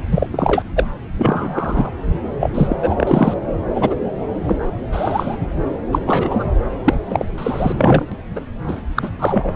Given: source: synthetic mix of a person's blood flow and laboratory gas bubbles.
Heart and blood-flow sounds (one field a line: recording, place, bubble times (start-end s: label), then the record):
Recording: Doppler ultrasound of blood flow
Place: subclavian vein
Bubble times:
0.11-0.27 s: bubbles
0.33-0.64 s: bubbles
0.76-0.89 s: bubbles
1.17-1.91 s: bubbles
2.40-2.50 s: bubbles
2.54-2.76 s: bubbles
2.83-3.34 s: bubbles
3.74-3.95 s: bubbles
4.46-4.69 s: bubbles
4.92-5.37 s: bubbles
5.92-5.99 s: bubbles
6.06-6.49 s: bubbles
6.84-6.94 s: bubbles
7.08-7.24 s: bubbles
7.38-8.07 s: bubbles
8.12-8.16 s: bubbles
8.36-8.42 s: bubbles
8.68-8.82 s: bubbles
8.96-9.10 s: bubbles
9.19-9.53 s: bubbles
From the record:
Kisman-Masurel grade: 243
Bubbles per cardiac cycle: several, 3 to 8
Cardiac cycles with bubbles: 100%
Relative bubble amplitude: loud (0.450 to 0.775)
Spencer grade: 3 (all of the cardiac periods contain showers or single bubble signals, but not dominating or overriding the cardiac motion signals)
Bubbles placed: anywhere in the cardiac cycle